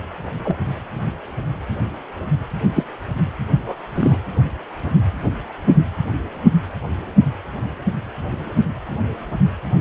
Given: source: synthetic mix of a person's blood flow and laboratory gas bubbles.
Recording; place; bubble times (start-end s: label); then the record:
Doppler ultrasound of blood flow; precordium
0.45-0.56 s: bubbles
2.75-2.84 s: bubbles
3.58-3.76 s: bubbles
3.94-4.18 s: bubbles
From the record:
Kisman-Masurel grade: 123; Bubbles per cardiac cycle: 1 to 2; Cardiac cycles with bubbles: 10 to 50%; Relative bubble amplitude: loud (0.450 to 0.775); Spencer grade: 2 (many but less than half of the cardiac periods contain bubble signals, singularly or in groups); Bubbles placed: only in the low amplitude regions of the cardiac cycle